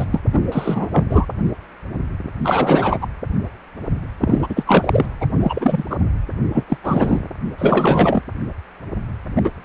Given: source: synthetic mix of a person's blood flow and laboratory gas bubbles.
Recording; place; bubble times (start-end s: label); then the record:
Doppler ultrasound of blood flow; precordium
0.00-0.05 s: bubbles
0.11-0.21 s: bubbles
0.33-0.39 s: bubbles
0.52-0.88 s: bubbles
0.92-1.04 s: bubbles
1.09-1.25 s: bubbles
2.44-2.99 s: bubbles
3.01-3.07 s: bubbles
4.21-5.05 s: bubbles
5.20-5.26 s: bubbles
5.40-5.84 s: bubbles
5.90-5.96 s: bubbles
6.53-6.64 s: bubbles
6.69-6.78 s: bubbles
6.83-7.21 s: bubbles
7.58-8.22 s: bubbles
9.35-9.50 s: bubbles
From the record:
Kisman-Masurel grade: 333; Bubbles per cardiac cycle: rolling drumbeat, 9 or more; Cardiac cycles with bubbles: 50 to 99%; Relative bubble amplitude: loud (0.450 to 0.775); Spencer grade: 3 (all of the cardiac periods contain showers or single bubble signals, but not dominating or overriding the cardiac motion signals); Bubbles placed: anywhere in the cardiac cycle